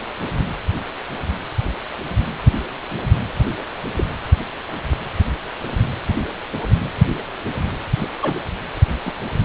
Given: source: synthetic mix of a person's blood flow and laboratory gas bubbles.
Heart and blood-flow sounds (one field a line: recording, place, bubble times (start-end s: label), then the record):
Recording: Doppler ultrasound of blood flow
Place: precordium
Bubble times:
3.96-4.04 s: bubbles
8.00-8.09 s: bubbles
8.21-8.39 s: bubbles
9.05-9.12 s: bubbles
From the record:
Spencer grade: 2 (many but less than half of the cardiac periods contain bubble signals, singularly or in groups)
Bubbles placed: anywhere in the cardiac cycle